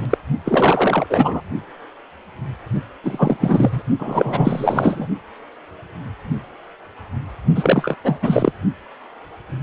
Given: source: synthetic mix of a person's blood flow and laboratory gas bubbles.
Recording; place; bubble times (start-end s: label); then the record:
Doppler ultrasound of blood flow; precordium
0.00-0.06 s: bubbles
0.10-0.17 s: bubbles
0.45-1.06 s: bubbles
1.09-1.41 s: bubbles
3.04-3.37 s: bubbles
3.40-3.82 s: bubbles
3.99-5.08 s: bubbles
7.55-7.96 s: bubbles
8.04-8.19 s: bubbles
8.22-8.52 s: bubbles
From the record:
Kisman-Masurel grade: 333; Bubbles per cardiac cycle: rolling drumbeat, 9 or more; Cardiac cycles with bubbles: 50 to 99%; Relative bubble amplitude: loud (0.450 to 0.775); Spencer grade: 3 (all of the cardiac periods contain showers or single bubble signals, but not dominating or overriding the cardiac motion signals); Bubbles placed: only in the low amplitude regions of the cardiac cycle